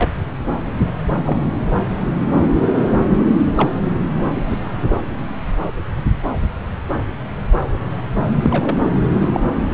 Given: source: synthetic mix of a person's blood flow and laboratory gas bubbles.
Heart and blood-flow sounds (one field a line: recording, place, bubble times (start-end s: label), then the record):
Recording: Doppler ultrasound of blood flow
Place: subclavian vein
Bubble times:
0.00-0.11 s: bubbles
1.25-1.47 s: bubbles
3.57-3.70 s: bubbles
4.18-4.60 s: bubbles
8.43-8.78 s: bubbles
9.12-9.29 s: bubbles
9.33-9.40 s: bubbles
9.72-9.74 s: bubbles
From the record:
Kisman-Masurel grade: 122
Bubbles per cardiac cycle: 1 to 2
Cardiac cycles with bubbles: 10 to 50%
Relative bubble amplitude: moderate (0.250 to 0.450)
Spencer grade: 2 (many but less than half of the cardiac periods contain bubble signals, singularly or in groups)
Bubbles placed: anywhere in the cardiac cycle